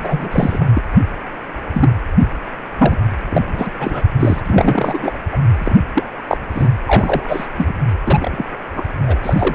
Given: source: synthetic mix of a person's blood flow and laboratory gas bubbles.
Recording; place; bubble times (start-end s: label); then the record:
Doppler ultrasound of blood flow; precordium
0.00-0.65 s: bubbles
0.74-0.81 s: bubbles
1.21-1.23 s: bubbles
1.74-1.90 s: bubbles
2.78-2.97 s: bubbles
3.30-3.42 s: bubbles
3.47-3.70 s: bubbles
3.79-4.04 s: bubbles
4.19-4.41 s: bubbles
4.46-5.17 s: bubbles
5.32-5.38 s: bubbles
5.59-5.75 s: bubbles
5.94-6.04 s: bubbles
6.28-6.38 s: bubbles
6.54-6.67 s: bubbles
6.85-7.46 s: bubbles
7.57-7.74 s: bubbles
8.04-8.46 s: bubbles
8.75-8.84 s: bubbles
9.06-9.18 s: bubbles
9.22-9.55 s: bubbles
From the record:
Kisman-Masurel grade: 233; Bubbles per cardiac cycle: several, 3 to 8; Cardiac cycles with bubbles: 50 to 99%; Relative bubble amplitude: loud (0.450 to 0.775); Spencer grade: 3 (all of the cardiac periods contain showers or single bubble signals, but not dominating or overriding the cardiac motion signals); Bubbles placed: anywhere in the cardiac cycle